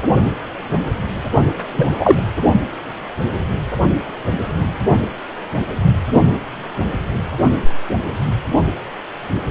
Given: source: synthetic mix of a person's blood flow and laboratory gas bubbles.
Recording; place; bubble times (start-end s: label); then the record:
Doppler ultrasound of blood flow; precordium
1.35-1.44 s: bubbles
1.73-1.96 s: bubbles
2.00-2.20 s: bubbles
From the record:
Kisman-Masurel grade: 223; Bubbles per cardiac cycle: several, 3 to 8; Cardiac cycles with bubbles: 10 to 50%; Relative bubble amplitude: loud (0.450 to 0.775); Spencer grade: 2 (many but less than half of the cardiac periods contain bubble signals, singularly or in groups); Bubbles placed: anywhere in the cardiac cycle